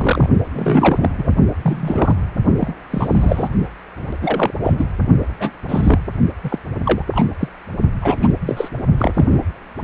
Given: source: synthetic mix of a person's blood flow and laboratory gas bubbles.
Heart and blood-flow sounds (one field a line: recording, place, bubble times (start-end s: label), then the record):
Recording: Doppler ultrasound of blood flow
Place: precordium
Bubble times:
0.00-0.30 s: bubbles
0.53-1.08 s: bubbles
1.17-1.32 s: bubbles
1.62-2.15 s: bubbles
2.60-2.76 s: bubbles
2.90-3.49 s: bubbles
4.22-4.51 s: bubbles
4.63-4.73 s: bubbles
4.77-4.86 s: bubbles
5.40-5.51 s: bubbles
5.68-5.99 s: bubbles
6.43-6.58 s: bubbles
6.83-7.02 s: bubbles
7.11-7.25 s: bubbles
7.39-7.48 s: bubbles
8.01-8.34 s: bubbles
8.41-8.69 s: bubbles
8.98-9.42 s: bubbles
From the record:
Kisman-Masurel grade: 243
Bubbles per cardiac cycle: several, 3 to 8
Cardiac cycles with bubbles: 100%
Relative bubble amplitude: loud (0.450 to 0.775)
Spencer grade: 3 (all of the cardiac periods contain showers or single bubble signals, but not dominating or overriding the cardiac motion signals)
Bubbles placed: only in the low amplitude regions of the cardiac cycle